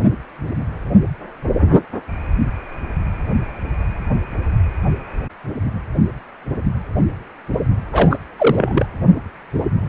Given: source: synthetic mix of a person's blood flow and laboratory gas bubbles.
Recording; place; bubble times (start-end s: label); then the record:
Doppler ultrasound of blood flow; precordium
7.92-8.19 s: bubbles
8.38-8.86 s: bubbles
From the record:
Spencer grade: 2 (many but less than half of the cardiac periods contain bubble signals, singularly or in groups); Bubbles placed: anywhere in the cardiac cycle